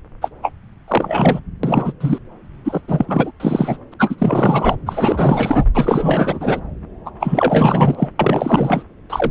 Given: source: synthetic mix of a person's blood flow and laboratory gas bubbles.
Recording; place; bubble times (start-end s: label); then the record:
Doppler ultrasound of blood flow; subclavian vein
0.22-0.29 s: bubbles
0.42-0.53 s: bubbles
0.88-1.40 s: bubbles
1.63-1.92 s: bubbles
2.00-2.19 s: bubbles
2.65-2.81 s: bubbles
2.88-3.31 s: bubbles
3.40-3.78 s: bubbles
3.92-3.94 s: bubbles
3.99-4.16 s: bubbles
4.18-4.76 s: bubbles
4.86-5.65 s: bubbles
5.74-6.61 s: bubbles
7.05-7.11 s: bubbles
7.20-8.09 s: bubbles
8.19-8.83 s: bubbles
9.10-9.31 s: bubbles
From the record:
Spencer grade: 4 (maximum detectable bubble signal sounding continuously throughout systole and diastole of every cardiac period, and overriding the amplitude of the normal cardiac signals); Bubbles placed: anywhere in the cardiac cycle